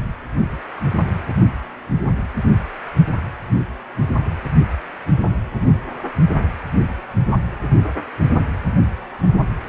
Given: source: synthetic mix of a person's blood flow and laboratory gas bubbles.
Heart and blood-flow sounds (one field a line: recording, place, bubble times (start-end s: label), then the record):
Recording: Doppler ultrasound of blood flow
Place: precordium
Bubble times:
no bubbles
From the record:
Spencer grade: 0 (complete lack of bubble signals)